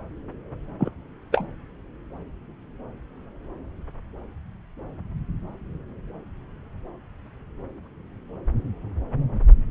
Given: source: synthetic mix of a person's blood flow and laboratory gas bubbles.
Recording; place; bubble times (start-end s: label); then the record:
Doppler ultrasound of blood flow; subclavian vein
0.79-0.91 s: bubbles
1.32-1.47 s: bubbles
From the record:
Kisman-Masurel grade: 112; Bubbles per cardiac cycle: 1 to 2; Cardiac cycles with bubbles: 1 to 10%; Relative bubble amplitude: moderate (0.250 to 0.450); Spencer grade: 1 (occasional bubble signal discernible with the cardiac motion signal, with majority of cardiac periods free of bubbles); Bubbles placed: anywhere in the cardiac cycle